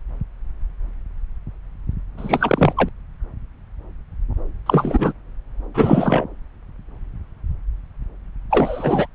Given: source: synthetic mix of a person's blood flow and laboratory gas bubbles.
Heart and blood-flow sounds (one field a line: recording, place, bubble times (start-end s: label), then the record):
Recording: Doppler ultrasound of blood flow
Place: subclavian vein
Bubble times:
2.17-2.73 s: bubbles
2.77-2.89 s: bubbles
4.66-5.12 s: bubbles
5.74-6.25 s: bubbles
8.50-9.07 s: bubbles
From the record:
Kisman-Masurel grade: 223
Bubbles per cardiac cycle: several, 3 to 8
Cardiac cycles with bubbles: 10 to 50%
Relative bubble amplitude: loud (0.450 to 0.775)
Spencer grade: 2 (many but less than half of the cardiac periods contain bubble signals, singularly or in groups)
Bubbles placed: anywhere in the cardiac cycle